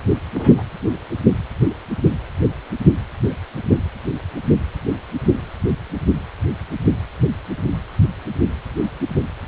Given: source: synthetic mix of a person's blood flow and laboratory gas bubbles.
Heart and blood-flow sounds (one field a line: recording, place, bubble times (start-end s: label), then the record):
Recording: Doppler ultrasound of blood flow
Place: precordium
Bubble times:
0.34-0.62 s: bubbles
3.29-3.34 s: bubbles
From the record:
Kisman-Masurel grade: 111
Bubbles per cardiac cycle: 1 to 2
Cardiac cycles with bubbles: 1 to 10%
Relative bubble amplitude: barely perceptible (0.100 to 0.250)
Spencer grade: 1 (occasional bubble signal discernible with the cardiac motion signal, with majority of cardiac periods free of bubbles)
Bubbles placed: anywhere in the cardiac cycle